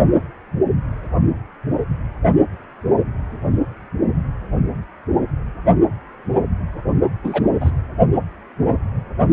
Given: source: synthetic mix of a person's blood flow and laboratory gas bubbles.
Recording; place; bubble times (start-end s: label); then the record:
Doppler ultrasound of blood flow; precordium
7.24-7.47 s: bubbles
7.60-7.71 s: bubbles
From the record:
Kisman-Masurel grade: 212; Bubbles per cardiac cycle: several, 3 to 8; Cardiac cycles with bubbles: 1 to 10%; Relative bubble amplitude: moderate (0.250 to 0.450); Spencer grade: 1 (occasional bubble signal discernible with the cardiac motion signal, with majority of cardiac periods free of bubbles); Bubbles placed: anywhere in the cardiac cycle